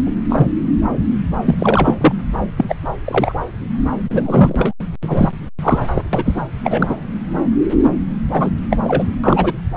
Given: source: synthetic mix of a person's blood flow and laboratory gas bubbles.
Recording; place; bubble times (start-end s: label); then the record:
Doppler ultrasound of blood flow; subclavian vein
0.06-0.12 s: bubbles
0.29-0.47 s: bubbles
1.45-1.95 s: bubbles
2.01-2.12 s: bubbles
2.57-2.76 s: bubbles
2.85-2.88 s: bubbles
3.04-3.35 s: bubbles
4.09-4.73 s: bubbles
5.02-5.28 s: bubbles
5.61-5.78 s: bubbles
5.94-6.02 s: bubbles
6.13-6.43 s: bubbles
6.63-6.95 s: bubbles
8.33-8.51 s: bubbles
8.71-8.77 s: bubbles
8.84-9.04 s: bubbles
9.24-9.54 s: bubbles
From the record:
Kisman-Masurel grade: 243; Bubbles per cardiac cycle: several, 3 to 8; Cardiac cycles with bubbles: 100%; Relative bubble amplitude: loud (0.450 to 0.775); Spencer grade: 3 (all of the cardiac periods contain showers or single bubble signals, but not dominating or overriding the cardiac motion signals); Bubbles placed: anywhere in the cardiac cycle